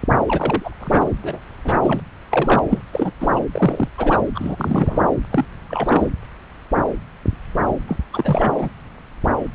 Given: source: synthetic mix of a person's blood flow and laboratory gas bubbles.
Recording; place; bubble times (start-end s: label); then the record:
Doppler ultrasound of blood flow; subclavian vein
0.28-0.77 s: bubbles
0.81-1.10 s: bubbles
1.22-1.39 s: bubbles
1.65-2.02 s: bubbles
2.30-2.61 s: bubbles
2.69-2.82 s: bubbles
2.92-3.11 s: bubbles
3.21-3.28 s: bubbles
3.35-3.40 s: bubbles
3.52-3.88 s: bubbles
3.98-4.21 s: bubbles
4.35-5.04 s: bubbles
5.31-5.45 s: bubbles
5.69-6.11 s: bubbles
7.88-7.99 s: bubbles
8.13-8.71 s: bubbles
From the record:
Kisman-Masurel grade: 332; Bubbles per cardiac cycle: rolling drumbeat, 9 or more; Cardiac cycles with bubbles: 50 to 99%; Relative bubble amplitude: moderate (0.250 to 0.450); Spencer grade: 3 (all of the cardiac periods contain showers or single bubble signals, but not dominating or overriding the cardiac motion signals); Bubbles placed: anywhere in the cardiac cycle